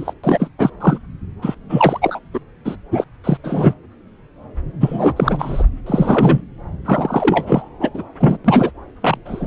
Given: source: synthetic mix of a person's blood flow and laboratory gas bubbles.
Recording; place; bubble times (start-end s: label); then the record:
Doppler ultrasound of blood flow; subclavian vein
0.00-0.14 s: bubbles
0.24-0.50 s: bubbles
0.58-0.70 s: bubbles
0.80-0.99 s: bubbles
1.42-1.55 s: bubbles
1.69-2.19 s: bubbles
2.33-2.40 s: bubbles
2.65-2.76 s: bubbles
2.91-3.04 s: bubbles
3.24-3.38 s: bubbles
3.44-3.73 s: bubbles
4.80-5.63 s: bubbles
5.86-6.42 s: bubbles
6.85-7.69 s: bubbles
7.80-7.89 s: bubbles
7.94-8.04 s: bubbles
8.20-8.37 s: bubbles
8.45-8.71 s: bubbles
9.00-9.18 s: bubbles
9.25-9.46 s: bubbles
From the record:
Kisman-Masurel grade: 333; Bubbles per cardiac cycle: rolling drumbeat, 9 or more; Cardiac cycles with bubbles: 50 to 99%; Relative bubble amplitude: loud (0.450 to 0.775); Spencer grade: 3 (all of the cardiac periods contain showers or single bubble signals, but not dominating or overriding the cardiac motion signals); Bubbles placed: anywhere in the cardiac cycle